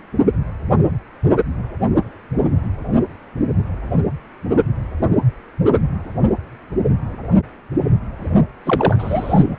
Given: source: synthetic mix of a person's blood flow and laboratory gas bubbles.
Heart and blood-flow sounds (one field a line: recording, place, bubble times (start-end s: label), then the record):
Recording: Doppler ultrasound of blood flow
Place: precordium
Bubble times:
8.66-9.57 s: bubbles
From the record:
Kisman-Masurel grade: 213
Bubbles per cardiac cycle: several, 3 to 8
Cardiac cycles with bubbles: 1 to 10%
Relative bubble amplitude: loud (0.450 to 0.775)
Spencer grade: 1 (occasional bubble signal discernible with the cardiac motion signal, with majority of cardiac periods free of bubbles)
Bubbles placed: only in the low amplitude regions of the cardiac cycle